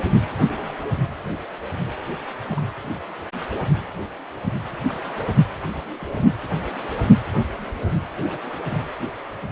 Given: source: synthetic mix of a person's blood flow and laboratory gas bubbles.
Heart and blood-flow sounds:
Doppler ultrasound of blood flow; precordium
0.47-0.58 s: bubbles
0.66-0.74 s: bubbles
2.51-2.54 s: bubbles
4.88-4.92 s: bubbles
5.07-5.15 s: bubbles
5.98-6.27 s: bubbles
8.15-8.38 s: bubbles
8.68-8.86 s: bubbles
From the record:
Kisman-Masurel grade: 121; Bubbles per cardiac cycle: 1 to 2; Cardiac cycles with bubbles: 10 to 50%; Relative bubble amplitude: barely perceptible (0.100 to 0.250); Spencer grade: 2 (many but less than half of the cardiac periods contain bubble signals, singularly or in groups); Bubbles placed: anywhere in the cardiac cycle

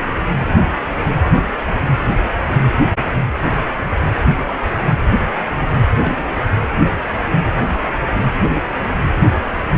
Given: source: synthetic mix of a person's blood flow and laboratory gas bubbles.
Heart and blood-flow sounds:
Doppler ultrasound of blood flow; precordium
6.02-6.35 s: bubbles
From the record:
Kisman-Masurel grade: 111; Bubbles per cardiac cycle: 1 to 2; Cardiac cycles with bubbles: 1 to 10%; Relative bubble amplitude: barely perceptible (0.100 to 0.250); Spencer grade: 1 (occasional bubble signal discernible with the cardiac motion signal, with majority of cardiac periods free of bubbles); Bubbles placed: anywhere in the cardiac cycle

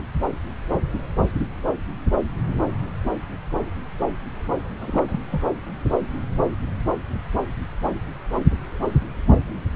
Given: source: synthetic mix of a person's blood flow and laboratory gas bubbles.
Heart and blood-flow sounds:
Doppler ultrasound of blood flow; subclavian vein
4.80-5.04 s: bubbles
5.07-5.20 s: bubbles
5.32-5.44 s: bubbles
From the record:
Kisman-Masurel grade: 221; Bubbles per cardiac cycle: several, 3 to 8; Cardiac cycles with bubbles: 10 to 50%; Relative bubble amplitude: barely perceptible (0.100 to 0.250); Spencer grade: 2 (many but less than half of the cardiac periods contain bubble signals, singularly or in groups); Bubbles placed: anywhere in the cardiac cycle

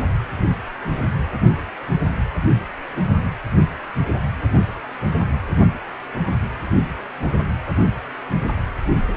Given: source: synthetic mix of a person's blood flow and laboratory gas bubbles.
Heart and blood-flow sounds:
Doppler ultrasound of blood flow; precordium
no bubbles
From the record:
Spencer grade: 0 (complete lack of bubble signals)

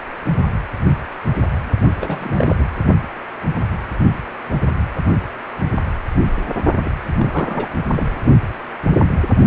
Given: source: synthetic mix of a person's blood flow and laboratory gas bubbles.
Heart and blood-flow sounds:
Doppler ultrasound of blood flow; precordium
2.01-2.64 s: bubbles
6.83-6.92 s: bubbles
7.17-7.67 s: bubbles
7.96-8.06 s: bubbles
From the record:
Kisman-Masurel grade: 222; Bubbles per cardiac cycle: several, 3 to 8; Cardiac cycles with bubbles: 10 to 50%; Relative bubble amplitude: moderate (0.250 to 0.450); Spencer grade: 2 (many but less than half of the cardiac periods contain bubble signals, singularly or in groups); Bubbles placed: only in the low amplitude regions of the cardiac cycle

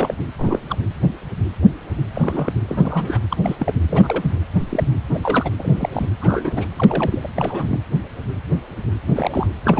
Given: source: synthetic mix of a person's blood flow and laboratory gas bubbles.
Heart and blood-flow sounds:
Doppler ultrasound of blood flow; precordium
0.00-0.14 s: bubbles
0.39-0.60 s: bubbles
0.69-0.78 s: bubbles
2.14-2.52 s: bubbles
2.69-3.19 s: bubbles
3.30-3.37 s: bubbles
3.42-3.55 s: bubbles
3.59-3.74 s: bubbles
3.89-4.35 s: bubbles
4.69-4.87 s: bubbles
5.10-5.51 s: bubbles
5.58-5.74 s: bubbles
5.76-6.09 s: bubbles
6.21-6.68 s: bubbles
6.76-7.29 s: bubbles
7.35-7.81 s: bubbles
9.06-9.47 s: bubbles
9.64-9.79 s: bubbles
From the record:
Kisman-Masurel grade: 232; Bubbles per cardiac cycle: several, 3 to 8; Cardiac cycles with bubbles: 50 to 99%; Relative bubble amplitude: moderate (0.250 to 0.450); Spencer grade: 3 (all of the cardiac periods contain showers or single bubble signals, but not dominating or overriding the cardiac motion signals); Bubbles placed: anywhere in the cardiac cycle

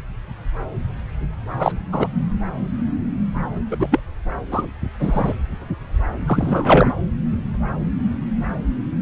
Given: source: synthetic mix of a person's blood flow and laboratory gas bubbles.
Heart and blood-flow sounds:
Doppler ultrasound of blood flow; subclavian vein
1.50-1.72 s: bubbles
1.92-2.08 s: bubbles
3.71-3.76 s: bubbles
3.79-3.87 s: bubbles
3.91-4.00 s: bubbles
4.51-4.67 s: bubbles
4.99-5.33 s: bubbles
6.27-6.94 s: bubbles
From the record:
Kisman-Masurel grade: 223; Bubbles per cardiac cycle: several, 3 to 8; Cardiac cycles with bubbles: 10 to 50%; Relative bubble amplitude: loud (0.450 to 0.775); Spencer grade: 2 (many but less than half of the cardiac periods contain bubble signals, singularly or in groups); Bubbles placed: anywhere in the cardiac cycle

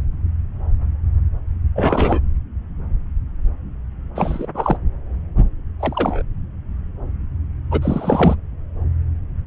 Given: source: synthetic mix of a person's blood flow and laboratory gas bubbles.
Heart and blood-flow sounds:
Doppler ultrasound of blood flow; subclavian vein
1.75-2.19 s: bubbles
4.15-4.47 s: bubbles
4.54-4.76 s: bubbles
5.79-6.22 s: bubbles
7.71-8.36 s: bubbles
From the record:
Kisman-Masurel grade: 223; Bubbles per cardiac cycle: several, 3 to 8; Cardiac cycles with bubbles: 10 to 50%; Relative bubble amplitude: loud (0.450 to 0.775); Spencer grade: 2 (many but less than half of the cardiac periods contain bubble signals, singularly or in groups); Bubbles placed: anywhere in the cardiac cycle

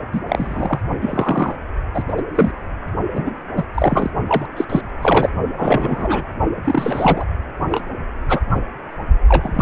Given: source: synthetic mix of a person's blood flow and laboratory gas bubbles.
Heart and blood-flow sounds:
Doppler ultrasound of blood flow; precordium
0.12-0.20 s: bubbles
0.28-0.81 s: bubbles
1.01-1.55 s: bubbles
1.94-2.04 s: bubbles
2.08-2.14 s: bubbles
2.17-2.23 s: bubbles
2.35-2.51 s: bubbles
3.15-3.35 s: bubbles
3.56-3.68 s: bubbles
3.74-4.11 s: bubbles
4.28-4.46 s: bubbles
4.57-4.65 s: bubbles
4.69-4.81 s: bubbles
5.01-5.29 s: bubbles
5.56-6.24 s: bubbles
6.64-7.25 s: bubbles
7.70-7.86 s: bubbles
8.29-8.40 s: bubbles
8.51-8.60 s: bubbles
9.28-9.62 s: bubbles
From the record:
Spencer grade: 3 (all of the cardiac periods contain showers or single bubble signals, but not dominating or overriding the cardiac motion signals); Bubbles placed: only in the low amplitude regions of the cardiac cycle

